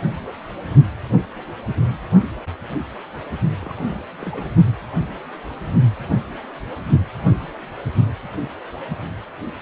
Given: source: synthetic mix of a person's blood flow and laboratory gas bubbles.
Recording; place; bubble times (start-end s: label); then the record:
Doppler ultrasound of blood flow; precordium
3.61-3.97 s: bubbles
4.21-4.46 s: bubbles
From the record:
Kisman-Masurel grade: 221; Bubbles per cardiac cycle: several, 3 to 8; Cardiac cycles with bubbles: 10 to 50%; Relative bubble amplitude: barely perceptible (0.100 to 0.250); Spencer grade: 2 (many but less than half of the cardiac periods contain bubble signals, singularly or in groups); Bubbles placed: only in the low amplitude regions of the cardiac cycle